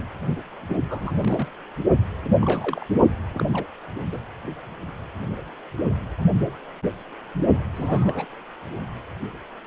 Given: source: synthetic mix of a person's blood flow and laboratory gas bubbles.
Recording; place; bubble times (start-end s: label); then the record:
Doppler ultrasound of blood flow; precordium
0.67-0.77 s: bubbles
0.89-1.48 s: bubbles
2.42-2.85 s: bubbles
3.34-3.66 s: bubbles
4.12-4.18 s: bubbles
7.74-8.26 s: bubbles
From the record:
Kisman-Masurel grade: 221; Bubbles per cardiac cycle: several, 3 to 8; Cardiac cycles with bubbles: 10 to 50%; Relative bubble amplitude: barely perceptible (0.100 to 0.250); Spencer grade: 2 (many but less than half of the cardiac periods contain bubble signals, singularly or in groups); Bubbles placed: only in the low amplitude regions of the cardiac cycle